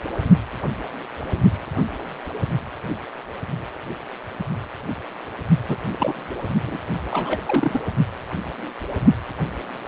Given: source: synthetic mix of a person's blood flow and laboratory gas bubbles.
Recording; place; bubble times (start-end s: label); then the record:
Doppler ultrasound of blood flow; precordium
5.69-5.77 s: bubbles
5.92-6.36 s: bubbles
6.63-6.78 s: bubbles
7.11-7.41 s: bubbles
7.46-7.82 s: bubbles
From the record:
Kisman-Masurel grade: 222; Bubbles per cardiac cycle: several, 3 to 8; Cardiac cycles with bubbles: 10 to 50%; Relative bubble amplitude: moderate (0.250 to 0.450); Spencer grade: 2 (many but less than half of the cardiac periods contain bubble signals, singularly or in groups); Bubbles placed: only in the low amplitude regions of the cardiac cycle